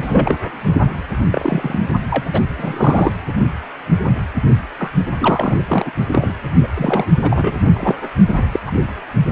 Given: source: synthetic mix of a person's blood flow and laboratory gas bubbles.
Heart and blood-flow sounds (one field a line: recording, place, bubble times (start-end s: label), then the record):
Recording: Doppler ultrasound of blood flow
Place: precordium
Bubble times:
0.00-0.37 s: bubbles
1.31-1.78 s: bubbles
2.10-2.40 s: bubbles
2.58-3.12 s: bubbles
4.79-4.92 s: bubbles
5.20-5.64 s: bubbles
5.68-5.91 s: bubbles
6.12-6.33 s: bubbles
6.62-6.67 s: bubbles
6.75-7.06 s: bubbles
7.20-7.58 s: bubbles
7.73-7.96 s: bubbles
8.38-8.43 s: bubbles
8.52-8.60 s: bubbles
8.65-8.71 s: bubbles
From the record:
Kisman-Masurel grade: 233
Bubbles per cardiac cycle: several, 3 to 8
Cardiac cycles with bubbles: 50 to 99%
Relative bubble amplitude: loud (0.450 to 0.775)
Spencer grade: 3 (all of the cardiac periods contain showers or single bubble signals, but not dominating or overriding the cardiac motion signals)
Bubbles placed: only in the low amplitude regions of the cardiac cycle